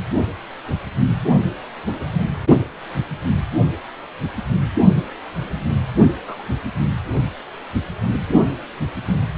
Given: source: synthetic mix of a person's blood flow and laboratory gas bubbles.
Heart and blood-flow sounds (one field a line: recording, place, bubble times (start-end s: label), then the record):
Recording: Doppler ultrasound of blood flow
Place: precordium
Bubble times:
6.24-6.43 s: bubbles
From the record:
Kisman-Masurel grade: 121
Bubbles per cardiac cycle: 1 to 2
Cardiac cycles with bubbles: 10 to 50%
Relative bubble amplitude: barely perceptible (0.100 to 0.250)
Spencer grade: 2 (many but less than half of the cardiac periods contain bubble signals, singularly or in groups)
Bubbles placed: anywhere in the cardiac cycle